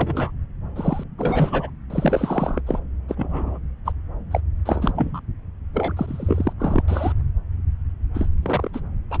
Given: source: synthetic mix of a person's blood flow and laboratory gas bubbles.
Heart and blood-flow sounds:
Doppler ultrasound of blood flow; subclavian vein
0.00-0.32 s: bubbles
0.76-1.04 s: bubbles
1.18-1.70 s: bubbles
1.90-2.61 s: bubbles
2.67-2.79 s: bubbles
3.08-3.58 s: bubbles
3.85-3.92 s: bubbles
4.31-4.41 s: bubbles
4.65-5.21 s: bubbles
5.74-5.94 s: bubbles
5.97-6.53 s: bubbles
6.59-6.83 s: bubbles
6.88-7.12 s: bubbles
8.14-8.27 s: bubbles
8.42-8.70 s: bubbles
8.73-8.80 s: bubbles
9.11-9.20 s: bubbles
From the record:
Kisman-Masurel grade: 232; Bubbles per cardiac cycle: several, 3 to 8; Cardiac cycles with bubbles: 50 to 99%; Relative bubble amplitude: moderate (0.250 to 0.450); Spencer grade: 3 (all of the cardiac periods contain showers or single bubble signals, but not dominating or overriding the cardiac motion signals); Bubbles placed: anywhere in the cardiac cycle

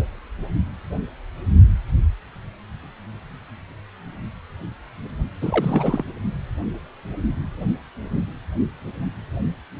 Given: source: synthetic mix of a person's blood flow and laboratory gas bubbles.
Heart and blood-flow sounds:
Doppler ultrasound of blood flow; precordium
5.42-6.04 s: bubbles
From the record:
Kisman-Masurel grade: 212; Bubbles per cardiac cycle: several, 3 to 8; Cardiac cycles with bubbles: 1 to 10%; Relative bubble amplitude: moderate (0.250 to 0.450); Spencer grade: 1 (occasional bubble signal discernible with the cardiac motion signal, with majority of cardiac periods free of bubbles); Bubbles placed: only in the low amplitude regions of the cardiac cycle

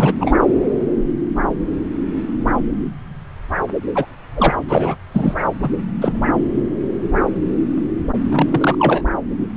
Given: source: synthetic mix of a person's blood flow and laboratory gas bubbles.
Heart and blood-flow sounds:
Doppler ultrasound of blood flow; subclavian vein
0.00-0.13 s: bubbles
0.21-0.32 s: bubbles
3.95-4.07 s: bubbles
4.36-4.54 s: bubbles
4.68-4.96 s: bubbles
5.12-5.36 s: bubbles
5.62-5.69 s: bubbles
6.01-6.23 s: bubbles
8.31-9.04 s: bubbles
From the record:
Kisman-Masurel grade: 223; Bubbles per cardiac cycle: several, 3 to 8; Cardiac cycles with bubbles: 10 to 50%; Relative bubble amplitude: loud (0.450 to 0.775); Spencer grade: 2 (many but less than half of the cardiac periods contain bubble signals, singularly or in groups); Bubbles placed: anywhere in the cardiac cycle

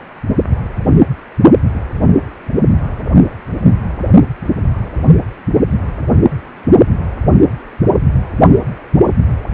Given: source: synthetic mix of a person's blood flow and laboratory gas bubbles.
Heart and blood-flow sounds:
Doppler ultrasound of blood flow; precordium
no bubbles
From the record:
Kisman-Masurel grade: 000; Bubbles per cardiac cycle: 0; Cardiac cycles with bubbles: 0%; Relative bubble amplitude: no bubbles discernible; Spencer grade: 0 (complete lack of bubble signals)

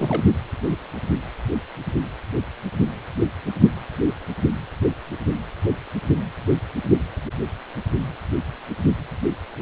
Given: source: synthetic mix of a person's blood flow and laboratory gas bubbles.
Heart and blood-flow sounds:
Doppler ultrasound of blood flow; precordium
0.00-0.24 s: bubbles
From the record:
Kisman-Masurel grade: 212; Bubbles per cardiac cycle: several, 3 to 8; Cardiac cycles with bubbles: 1 to 10%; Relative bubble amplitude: moderate (0.250 to 0.450); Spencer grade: 1 (occasional bubble signal discernible with the cardiac motion signal, with majority of cardiac periods free of bubbles); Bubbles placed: only in the low amplitude regions of the cardiac cycle

